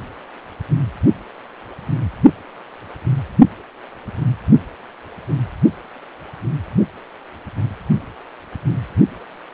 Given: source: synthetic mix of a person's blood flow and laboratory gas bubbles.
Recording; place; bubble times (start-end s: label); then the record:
Doppler ultrasound of blood flow; precordium
no bubbles
From the record:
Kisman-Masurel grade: 000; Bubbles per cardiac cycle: 0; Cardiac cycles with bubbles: 0%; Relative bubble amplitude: no bubbles discernible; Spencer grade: 0 (complete lack of bubble signals)